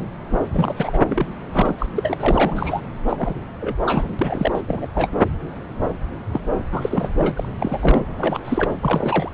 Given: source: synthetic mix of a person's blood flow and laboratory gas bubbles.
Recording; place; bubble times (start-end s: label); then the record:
Doppler ultrasound of blood flow; subclavian vein
0.30-0.38 s: bubbles
0.52-1.03 s: bubbles
1.07-1.26 s: bubbles
1.52-1.75 s: bubbles
1.78-1.86 s: bubbles
1.95-2.14 s: bubbles
2.19-2.81 s: bubbles
3.07-3.34 s: bubbles
3.60-3.74 s: bubbles
3.81-4.08 s: bubbles
4.19-4.62 s: bubbles
4.68-4.87 s: bubbles
4.95-5.09 s: bubbles
6.32-6.41 s: bubbles
6.71-7.32 s: bubbles
7.36-7.49 s: bubbles
7.60-8.06 s: bubbles
8.18-8.42 s: bubbles
8.45-8.71 s: bubbles
8.81-9.31 s: bubbles
From the record:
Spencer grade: 3 (all of the cardiac periods contain showers or single bubble signals, but not dominating or overriding the cardiac motion signals); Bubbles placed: anywhere in the cardiac cycle